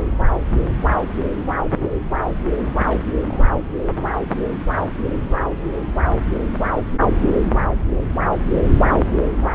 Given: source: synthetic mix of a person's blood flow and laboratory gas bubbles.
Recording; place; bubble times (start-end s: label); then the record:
Doppler ultrasound of blood flow; subclavian vein
2.59-2.63 s: bubbles
2.87-3.19 s: bubbles
3.28-3.45 s: bubbles
From the record:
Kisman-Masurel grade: 211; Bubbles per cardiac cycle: several, 3 to 8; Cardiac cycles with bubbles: 1 to 10%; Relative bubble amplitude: barely perceptible (0.100 to 0.250); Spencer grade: 1 (occasional bubble signal discernible with the cardiac motion signal, with majority of cardiac periods free of bubbles); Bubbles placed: anywhere in the cardiac cycle